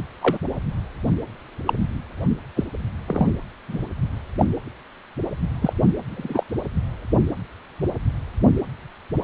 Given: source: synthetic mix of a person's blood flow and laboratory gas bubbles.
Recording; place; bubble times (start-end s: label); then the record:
Doppler ultrasound of blood flow; precordium
0.21-0.38 s: bubbles
1.67-1.73 s: bubbles
2.56-2.64 s: bubbles
3.08-3.31 s: bubbles
3.68-3.89 s: bubbles
4.38-4.45 s: bubbles
5.61-5.73 s: bubbles
6.10-6.43 s: bubbles
From the record:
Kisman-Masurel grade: 122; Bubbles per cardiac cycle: 1 to 2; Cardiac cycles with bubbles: 10 to 50%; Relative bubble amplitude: moderate (0.250 to 0.450); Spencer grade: 2 (many but less than half of the cardiac periods contain bubble signals, singularly or in groups); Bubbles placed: anywhere in the cardiac cycle